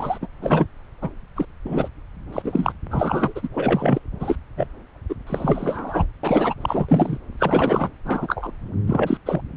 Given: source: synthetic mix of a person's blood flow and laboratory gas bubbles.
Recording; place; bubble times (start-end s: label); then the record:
Doppler ultrasound of blood flow; subclavian vein
0.00-0.18 s: bubbles
0.21-0.27 s: bubbles
0.42-0.67 s: bubbles
1.02-1.10 s: bubbles
1.35-1.45 s: bubbles
1.65-1.88 s: bubbles
2.32-2.73 s: bubbles
2.90-3.48 s: bubbles
3.53-3.99 s: bubbles
4.20-4.36 s: bubbles
4.57-4.67 s: bubbles
5.09-5.15 s: bubbles
5.27-6.06 s: bubbles
6.23-6.54 s: bubbles
6.61-6.86 s: bubbles
6.89-7.18 s: bubbles
7.39-7.88 s: bubbles
8.04-8.51 s: bubbles
8.87-9.17 s: bubbles
9.25-9.41 s: bubbles
From the record:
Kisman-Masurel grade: 242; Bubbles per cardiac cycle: several, 3 to 8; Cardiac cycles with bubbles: 100%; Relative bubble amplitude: moderate (0.250 to 0.450); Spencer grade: 3 (all of the cardiac periods contain showers or single bubble signals, but not dominating or overriding the cardiac motion signals); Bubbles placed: anywhere in the cardiac cycle